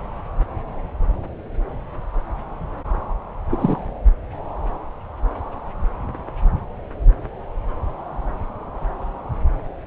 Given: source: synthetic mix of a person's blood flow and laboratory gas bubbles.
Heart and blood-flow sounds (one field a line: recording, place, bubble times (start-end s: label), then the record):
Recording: Doppler ultrasound of blood flow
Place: subclavian vein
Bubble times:
3.51-3.87 s: bubbles
From the record:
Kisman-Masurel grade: 112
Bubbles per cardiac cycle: 1 to 2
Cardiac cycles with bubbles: 1 to 10%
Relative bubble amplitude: moderate (0.250 to 0.450)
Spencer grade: 1 (occasional bubble signal discernible with the cardiac motion signal, with majority of cardiac periods free of bubbles)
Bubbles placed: anywhere in the cardiac cycle